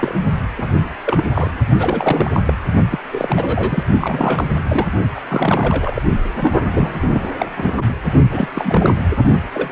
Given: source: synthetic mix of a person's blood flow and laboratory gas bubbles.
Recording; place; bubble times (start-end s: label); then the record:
Doppler ultrasound of blood flow; precordium
0.00-0.15 s: bubbles
0.55-0.90 s: bubbles
1.05-1.30 s: bubbles
1.33-1.51 s: bubbles
1.78-2.31 s: bubbles
2.33-2.40 s: bubbles
2.46-2.54 s: bubbles
2.91-3.00 s: bubbles
3.12-3.84 s: bubbles
4.01-4.44 s: bubbles
4.68-4.88 s: bubbles
5.15-5.21 s: bubbles
5.28-6.02 s: bubbles
6.35-7.33 s: bubbles
7.39-7.46 s: bubbles
7.56-7.83 s: bubbles
8.31-8.48 s: bubbles
8.54-8.95 s: bubbles
9.54-9.71 s: bubbles
From the record:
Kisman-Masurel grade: 342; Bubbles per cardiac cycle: rolling drumbeat, 9 or more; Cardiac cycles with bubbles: 100%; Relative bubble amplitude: moderate (0.250 to 0.450); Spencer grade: 3 (all of the cardiac periods contain showers or single bubble signals, but not dominating or overriding the cardiac motion signals); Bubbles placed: only in the low amplitude regions of the cardiac cycle